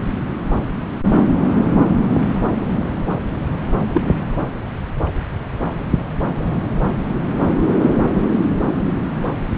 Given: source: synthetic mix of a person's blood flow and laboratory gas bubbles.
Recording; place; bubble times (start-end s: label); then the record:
Doppler ultrasound of blood flow; subclavian vein
3.93-4.01 s: bubbles
From the record:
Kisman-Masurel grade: 113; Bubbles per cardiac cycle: 1 to 2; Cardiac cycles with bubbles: 1 to 10%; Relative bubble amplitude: loud (0.450 to 0.775); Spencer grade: 1 (occasional bubble signal discernible with the cardiac motion signal, with majority of cardiac periods free of bubbles); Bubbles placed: anywhere in the cardiac cycle